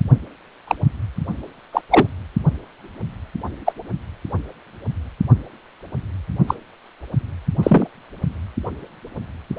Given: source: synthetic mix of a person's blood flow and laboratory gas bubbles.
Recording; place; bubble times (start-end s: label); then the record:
Doppler ultrasound of blood flow; precordium
0.68-0.75 s: bubbles
1.73-1.81 s: bubbles
1.90-2.07 s: bubbles
3.66-3.72 s: bubbles
6.48-6.54 s: bubbles
7.63-7.88 s: bubbles
From the record:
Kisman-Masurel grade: 123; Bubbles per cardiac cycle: 1 to 2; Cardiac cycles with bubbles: 10 to 50%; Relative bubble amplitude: loud (0.450 to 0.775); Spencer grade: 2 (many but less than half of the cardiac periods contain bubble signals, singularly or in groups); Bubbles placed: only in the low amplitude regions of the cardiac cycle